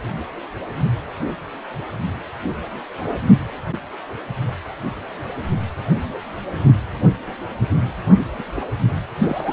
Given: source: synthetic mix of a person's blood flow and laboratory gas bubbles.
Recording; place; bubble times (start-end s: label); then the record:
Doppler ultrasound of blood flow; precordium
8.38-8.44 s: bubbles
8.55-8.71 s: bubbles
9.19-9.53 s: bubbles
From the record:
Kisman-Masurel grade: 212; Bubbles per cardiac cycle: several, 3 to 8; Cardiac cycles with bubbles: 1 to 10%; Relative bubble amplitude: moderate (0.250 to 0.450); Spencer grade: 1 (occasional bubble signal discernible with the cardiac motion signal, with majority of cardiac periods free of bubbles); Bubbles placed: anywhere in the cardiac cycle